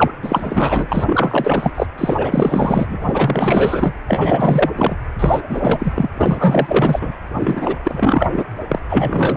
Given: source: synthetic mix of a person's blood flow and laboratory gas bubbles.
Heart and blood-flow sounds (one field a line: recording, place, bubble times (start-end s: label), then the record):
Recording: Doppler ultrasound of blood flow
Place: precordium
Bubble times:
0.00-0.12 s: bubbles
0.23-1.72 s: bubbles
1.75-1.87 s: bubbles
1.98-2.96 s: bubbles
3.00-3.96 s: bubbles
4.07-4.71 s: bubbles
4.75-4.97 s: bubbles
5.19-5.41 s: bubbles
5.49-6.10 s: bubbles
6.17-7.13 s: bubbles
7.33-7.76 s: bubbles
7.84-8.44 s: bubbles
8.69-8.79 s: bubbles
8.88-9.37 s: bubbles
From the record:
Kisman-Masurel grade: 444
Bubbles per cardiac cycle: continuous sound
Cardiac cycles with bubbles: 100%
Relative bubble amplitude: maximal (0.775 to 0.999)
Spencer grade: 4 (maximum detectable bubble signal sounding continuously throughout systole and diastole of every cardiac period, and overriding the amplitude of the normal cardiac signals)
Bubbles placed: anywhere in the cardiac cycle